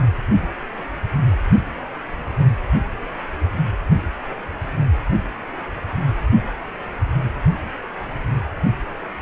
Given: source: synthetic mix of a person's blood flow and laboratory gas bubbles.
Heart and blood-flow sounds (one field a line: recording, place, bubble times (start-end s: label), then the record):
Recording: Doppler ultrasound of blood flow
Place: precordium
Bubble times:
no bubbles
From the record:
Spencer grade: 0 (complete lack of bubble signals)